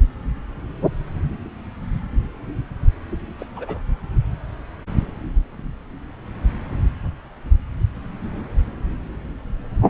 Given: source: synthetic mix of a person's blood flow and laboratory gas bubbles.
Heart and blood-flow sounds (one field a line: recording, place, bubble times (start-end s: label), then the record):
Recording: Doppler ultrasound of blood flow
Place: subclavian vein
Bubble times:
3.39-3.46 s: bubbles
3.56-3.80 s: bubbles
From the record:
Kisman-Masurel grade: 111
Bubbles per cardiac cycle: 1 to 2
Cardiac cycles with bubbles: 1 to 10%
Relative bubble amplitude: barely perceptible (0.100 to 0.250)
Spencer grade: 1 (occasional bubble signal discernible with the cardiac motion signal, with majority of cardiac periods free of bubbles)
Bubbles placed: anywhere in the cardiac cycle